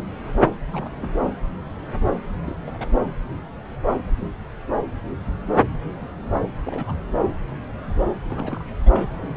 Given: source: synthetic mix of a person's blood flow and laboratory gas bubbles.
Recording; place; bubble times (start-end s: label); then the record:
Doppler ultrasound of blood flow; subclavian vein
0.71-0.89 s: bubbles
0.96-1.12 s: bubbles
1.21-1.27 s: bubbles
2.44-2.60 s: bubbles
2.67-2.91 s: bubbles
6.66-6.96 s: bubbles
8.26-8.64 s: bubbles
8.85-9.08 s: bubbles
From the record:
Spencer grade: 2 (many but less than half of the cardiac periods contain bubble signals, singularly or in groups); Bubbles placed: anywhere in the cardiac cycle